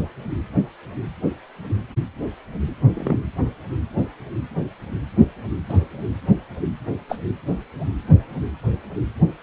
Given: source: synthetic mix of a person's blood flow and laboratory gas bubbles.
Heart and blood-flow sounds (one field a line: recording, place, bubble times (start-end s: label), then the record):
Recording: Doppler ultrasound of blood flow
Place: precordium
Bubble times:
2.96-3.19 s: bubbles
5.69-5.79 s: bubbles
7.08-7.17 s: bubbles
From the record:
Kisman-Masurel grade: 122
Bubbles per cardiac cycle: 1 to 2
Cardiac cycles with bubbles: 10 to 50%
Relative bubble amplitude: moderate (0.250 to 0.450)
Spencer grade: 2 (many but less than half of the cardiac periods contain bubble signals, singularly or in groups)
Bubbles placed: anywhere in the cardiac cycle